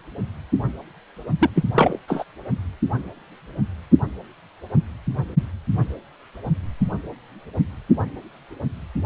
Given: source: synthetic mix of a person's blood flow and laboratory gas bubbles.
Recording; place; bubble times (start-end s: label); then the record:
Doppler ultrasound of blood flow; precordium
1.40-1.50 s: bubbles
1.55-1.64 s: bubbles
1.75-1.98 s: bubbles
2.08-2.24 s: bubbles
From the record:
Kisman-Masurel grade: 222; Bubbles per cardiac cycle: several, 3 to 8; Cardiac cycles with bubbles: 10 to 50%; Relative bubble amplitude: moderate (0.250 to 0.450); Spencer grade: 2 (many but less than half of the cardiac periods contain bubble signals, singularly or in groups); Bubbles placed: only in the low amplitude regions of the cardiac cycle